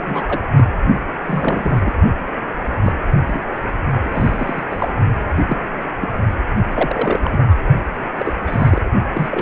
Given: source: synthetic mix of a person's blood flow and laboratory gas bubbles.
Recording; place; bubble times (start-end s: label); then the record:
Doppler ultrasound of blood flow; precordium
0.00-0.24 s: bubbles
0.26-0.40 s: bubbles
0.55-0.65 s: bubbles
1.25-1.92 s: bubbles
2.81-2.92 s: bubbles
3.27-3.42 s: bubbles
4.04-4.63 s: bubbles
4.69-4.88 s: bubbles
5.28-5.33 s: bubbles
5.38-5.66 s: bubbles
6.01-6.08 s: bubbles
6.74-7.20 s: bubbles
7.23-7.42 s: bubbles
7.50-7.54 s: bubbles
8.18-8.35 s: bubbles
8.46-8.84 s: bubbles
9.14-9.42 s: bubbles
From the record:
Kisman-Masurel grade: 242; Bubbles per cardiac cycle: several, 3 to 8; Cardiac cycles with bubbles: 100%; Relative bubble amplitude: moderate (0.250 to 0.450); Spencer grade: 3 (all of the cardiac periods contain showers or single bubble signals, but not dominating or overriding the cardiac motion signals); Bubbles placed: only in the low amplitude regions of the cardiac cycle